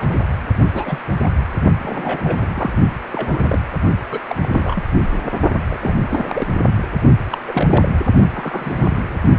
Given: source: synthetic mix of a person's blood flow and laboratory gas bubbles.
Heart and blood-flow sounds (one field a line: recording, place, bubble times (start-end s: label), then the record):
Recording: Doppler ultrasound of blood flow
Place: precordium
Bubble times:
0.00-0.22 s: bubbles
0.73-0.98 s: bubbles
1.22-1.27 s: bubbles
1.82-2.79 s: bubbles
3.12-3.58 s: bubbles
4.11-4.20 s: bubbles
4.28-4.36 s: bubbles
4.42-4.84 s: bubbles
5.12-5.23 s: bubbles
5.70-5.95 s: bubbles
6.09-6.48 s: bubbles
7.30-7.38 s: bubbles
7.47-7.88 s: bubbles
8.33-9.18 s: bubbles
From the record:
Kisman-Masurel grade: 242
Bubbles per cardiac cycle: several, 3 to 8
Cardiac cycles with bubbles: 100%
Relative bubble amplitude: moderate (0.250 to 0.450)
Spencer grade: 3 (all of the cardiac periods contain showers or single bubble signals, but not dominating or overriding the cardiac motion signals)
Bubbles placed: only in the low amplitude regions of the cardiac cycle